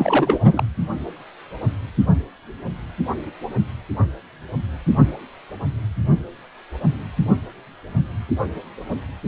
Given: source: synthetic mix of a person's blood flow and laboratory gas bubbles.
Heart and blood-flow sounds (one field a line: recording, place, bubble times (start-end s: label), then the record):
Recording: Doppler ultrasound of blood flow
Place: precordium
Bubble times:
0.00-0.65 s: bubbles
From the record:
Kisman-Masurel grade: 212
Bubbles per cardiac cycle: several, 3 to 8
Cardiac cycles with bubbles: 1 to 10%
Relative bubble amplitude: moderate (0.250 to 0.450)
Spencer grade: 1 (occasional bubble signal discernible with the cardiac motion signal, with majority of cardiac periods free of bubbles)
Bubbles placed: only in the low amplitude regions of the cardiac cycle